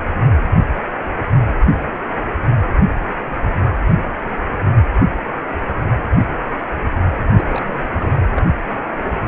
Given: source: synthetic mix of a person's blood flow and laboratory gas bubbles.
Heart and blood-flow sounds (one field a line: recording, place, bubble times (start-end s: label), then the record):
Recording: Doppler ultrasound of blood flow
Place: precordium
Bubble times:
7.37-7.46 s: bubbles
7.48-8.26 s: bubbles
8.37-8.42 s: bubbles
From the record:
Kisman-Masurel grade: 211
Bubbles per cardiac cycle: several, 3 to 8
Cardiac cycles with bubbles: 1 to 10%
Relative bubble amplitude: barely perceptible (0.100 to 0.250)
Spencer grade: 1 (occasional bubble signal discernible with the cardiac motion signal, with majority of cardiac periods free of bubbles)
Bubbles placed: anywhere in the cardiac cycle